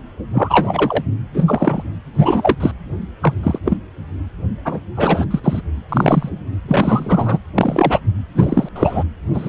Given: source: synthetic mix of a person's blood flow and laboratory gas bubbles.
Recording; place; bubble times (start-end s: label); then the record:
Doppler ultrasound of blood flow; precordium
0.33-1.04 s: bubbles
1.34-1.82 s: bubbles
2.15-2.56 s: bubbles
2.60-2.72 s: bubbles
3.21-3.33 s: bubbles
3.43-3.58 s: bubbles
3.65-3.77 s: bubbles
4.65-4.79 s: bubbles
4.96-5.25 s: bubbles
5.31-5.40 s: bubbles
5.43-5.62 s: bubbles
5.88-6.29 s: bubbles
6.67-7.39 s: bubbles
7.54-8.00 s: bubbles
8.34-8.69 s: bubbles
8.75-9.04 s: bubbles
9.33-9.49 s: bubbles
From the record:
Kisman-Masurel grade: 243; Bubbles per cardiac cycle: several, 3 to 8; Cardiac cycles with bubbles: 100%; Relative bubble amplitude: loud (0.450 to 0.775); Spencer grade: 3 (all of the cardiac periods contain showers or single bubble signals, but not dominating or overriding the cardiac motion signals); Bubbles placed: anywhere in the cardiac cycle